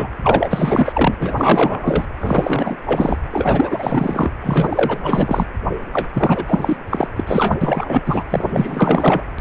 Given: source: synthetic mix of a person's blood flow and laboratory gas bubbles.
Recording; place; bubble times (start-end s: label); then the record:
Doppler ultrasound of blood flow; precordium
0.00-0.08 s: bubbles
0.22-1.15 s: bubbles
1.19-2.06 s: bubbles
2.20-2.77 s: bubbles
2.85-3.17 s: bubbles
3.31-4.31 s: bubbles
4.40-5.48 s: bubbles
5.93-6.08 s: bubbles
6.13-6.44 s: bubbles
6.47-6.77 s: bubbles
6.90-7.08 s: bubbles
7.16-7.24 s: bubbles
7.27-7.57 s: bubbles
7.61-8.02 s: bubbles
8.05-8.24 s: bubbles
8.29-9.21 s: bubbles
From the record:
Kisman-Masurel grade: 444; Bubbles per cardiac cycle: continuous sound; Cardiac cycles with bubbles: 100%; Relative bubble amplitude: maximal (0.775 to 0.999); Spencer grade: 4 (maximum detectable bubble signal sounding continuously throughout systole and diastole of every cardiac period, and overriding the amplitude of the normal cardiac signals); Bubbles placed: anywhere in the cardiac cycle